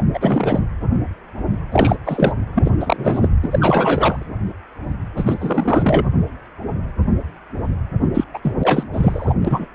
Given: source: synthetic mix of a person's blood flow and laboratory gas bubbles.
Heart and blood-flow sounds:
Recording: Doppler ultrasound of blood flow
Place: precordium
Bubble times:
0.00-0.04 s: bubbles
0.13-0.59 s: bubbles
1.72-1.96 s: bubbles
2.05-2.33 s: bubbles
2.55-2.71 s: bubbles
2.80-3.29 s: bubbles
3.43-4.26 s: bubbles
5.17-6.06 s: bubbles
8.14-8.24 s: bubbles
8.34-8.38 s: bubbles
8.43-8.53 s: bubbles
8.59-8.87 s: bubbles
8.93-9.34 s: bubbles
9.45-9.67 s: bubbles
From the record:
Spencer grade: 3 (all of the cardiac periods contain showers or single bubble signals, but not dominating or overriding the cardiac motion signals)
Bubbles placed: anywhere in the cardiac cycle

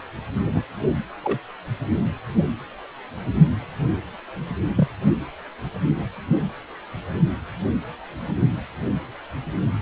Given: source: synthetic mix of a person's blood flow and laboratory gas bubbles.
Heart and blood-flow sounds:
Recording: Doppler ultrasound of blood flow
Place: precordium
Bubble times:
0.44-0.50 s: bubbles
0.54-0.62 s: bubbles
1.23-1.39 s: bubbles
4.75-4.88 s: bubbles
From the record:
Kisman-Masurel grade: 122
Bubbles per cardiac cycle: 1 to 2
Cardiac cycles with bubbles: 10 to 50%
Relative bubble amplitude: moderate (0.250 to 0.450)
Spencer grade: 2 (many but less than half of the cardiac periods contain bubble signals, singularly or in groups)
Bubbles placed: anywhere in the cardiac cycle

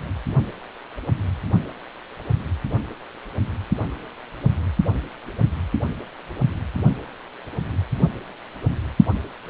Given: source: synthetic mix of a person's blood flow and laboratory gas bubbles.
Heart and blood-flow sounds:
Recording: Doppler ultrasound of blood flow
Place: precordium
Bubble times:
no bubbles
From the record:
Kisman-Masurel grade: 000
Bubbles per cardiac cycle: 0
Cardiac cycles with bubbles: 0%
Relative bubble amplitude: no bubbles discernible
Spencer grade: 0 (complete lack of bubble signals)

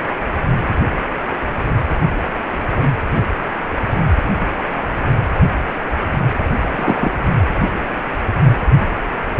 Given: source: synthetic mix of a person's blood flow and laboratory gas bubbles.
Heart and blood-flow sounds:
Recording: Doppler ultrasound of blood flow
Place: precordium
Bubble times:
6.71-7.11 s: bubbles
From the record:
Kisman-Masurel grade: 123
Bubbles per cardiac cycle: 1 to 2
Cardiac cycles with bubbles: 10 to 50%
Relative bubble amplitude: loud (0.450 to 0.775)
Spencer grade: 2 (many but less than half of the cardiac periods contain bubble signals, singularly or in groups)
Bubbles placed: anywhere in the cardiac cycle

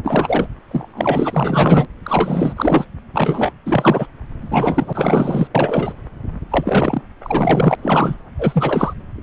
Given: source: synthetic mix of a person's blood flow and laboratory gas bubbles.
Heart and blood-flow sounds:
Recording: Doppler ultrasound of blood flow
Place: subclavian vein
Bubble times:
0.04-0.46 s: bubbles
0.71-1.87 s: bubbles
2.03-2.53 s: bubbles
2.56-2.85 s: bubbles
3.13-3.52 s: bubbles
3.65-4.07 s: bubbles
4.41-5.47 s: bubbles
5.54-5.92 s: bubbles
6.50-7.01 s: bubbles
7.23-7.75 s: bubbles
7.82-8.16 s: bubbles
8.38-8.94 s: bubbles
From the record:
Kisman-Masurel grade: 333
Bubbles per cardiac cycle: rolling drumbeat, 9 or more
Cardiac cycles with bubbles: 50 to 99%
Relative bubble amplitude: loud (0.450 to 0.775)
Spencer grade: 3 (all of the cardiac periods contain showers or single bubble signals, but not dominating or overriding the cardiac motion signals)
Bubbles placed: anywhere in the cardiac cycle

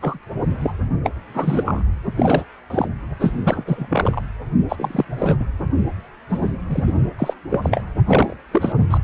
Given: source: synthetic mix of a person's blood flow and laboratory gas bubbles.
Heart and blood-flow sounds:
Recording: Doppler ultrasound of blood flow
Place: precordium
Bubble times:
0.01-0.19 s: bubbles
0.61-0.73 s: bubbles
1.04-1.10 s: bubbles
1.34-1.83 s: bubbles
2.04-2.12 s: bubbles
2.16-2.44 s: bubbles
2.70-2.88 s: bubbles
3.19-3.32 s: bubbles
3.44-4.21 s: bubbles
4.68-5.04 s: bubbles
5.18-5.37 s: bubbles
5.39-5.45 s: bubbles
6.29-6.51 s: bubbles
6.70-6.93 s: bubbles
7.18-7.33 s: bubbles
7.50-7.81 s: bubbles
8.07-8.35 s: bubbles
8.51-8.72 s: bubbles
8.90-8.98 s: bubbles
From the record:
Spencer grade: 3 (all of the cardiac periods contain showers or single bubble signals, but not dominating or overriding the cardiac motion signals)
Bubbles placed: only in the low amplitude regions of the cardiac cycle

